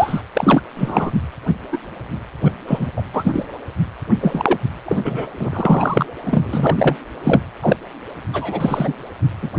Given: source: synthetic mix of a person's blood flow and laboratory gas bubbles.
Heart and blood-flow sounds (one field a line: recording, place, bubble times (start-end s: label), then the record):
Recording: Doppler ultrasound of blood flow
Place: precordium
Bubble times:
0.00-0.23 s: bubbles
0.33-0.61 s: bubbles
0.76-1.11 s: bubbles
1.71-1.78 s: bubbles
2.45-2.51 s: bubbles
2.67-2.88 s: bubbles
2.96-3.02 s: bubbles
3.13-3.46 s: bubbles
4.21-4.58 s: bubbles
4.84-5.01 s: bubbles
5.04-5.26 s: bubbles
5.39-6.06 s: bubbles
6.25-6.96 s: bubbles
7.24-7.41 s: bubbles
7.62-7.76 s: bubbles
8.33-8.93 s: bubbles
9.42-9.49 s: bubbles
From the record:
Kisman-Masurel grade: 243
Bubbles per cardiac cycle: several, 3 to 8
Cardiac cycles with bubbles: 100%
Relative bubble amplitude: loud (0.450 to 0.775)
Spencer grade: 3 (all of the cardiac periods contain showers or single bubble signals, but not dominating or overriding the cardiac motion signals)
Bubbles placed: anywhere in the cardiac cycle